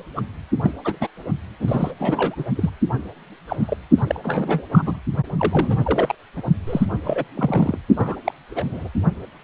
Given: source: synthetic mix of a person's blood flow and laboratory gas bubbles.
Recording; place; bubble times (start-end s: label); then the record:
Doppler ultrasound of blood flow; precordium
0.00-0.03 s: bubbles
0.16-0.22 s: bubbles
0.62-0.72 s: bubbles
0.85-0.97 s: bubbles
1.00-1.08 s: bubbles
1.60-1.91 s: bubbles
1.99-2.44 s: bubbles
2.56-2.70 s: bubbles
3.48-3.56 s: bubbles
3.59-3.77 s: bubbles
3.97-4.03 s: bubbles
4.07-4.20 s: bubbles
4.23-4.62 s: bubbles
4.72-4.99 s: bubbles
5.38-6.15 s: bubbles
6.36-6.42 s: bubbles
6.67-6.86 s: bubbles
7.03-7.24 s: bubbles
7.35-7.78 s: bubbles
7.96-8.16 s: bubbles
8.24-8.32 s: bubbles
8.54-8.89 s: bubbles
From the record:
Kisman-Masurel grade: 232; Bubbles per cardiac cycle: several, 3 to 8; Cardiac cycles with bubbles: 50 to 99%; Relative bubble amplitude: moderate (0.250 to 0.450); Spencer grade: 3 (all of the cardiac periods contain showers or single bubble signals, but not dominating or overriding the cardiac motion signals); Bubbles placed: only in the low amplitude regions of the cardiac cycle